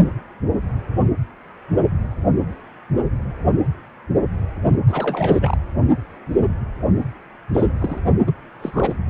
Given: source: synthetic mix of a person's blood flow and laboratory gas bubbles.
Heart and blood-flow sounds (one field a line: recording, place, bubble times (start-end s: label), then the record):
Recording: Doppler ultrasound of blood flow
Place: precordium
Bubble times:
4.67-4.73 s: bubbles
4.87-5.58 s: bubbles
7.54-7.72 s: bubbles
7.79-7.98 s: bubbles
8.27-8.31 s: bubbles
8.59-8.95 s: bubbles
From the record:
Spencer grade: 2 (many but less than half of the cardiac periods contain bubble signals, singularly or in groups)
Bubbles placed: anywhere in the cardiac cycle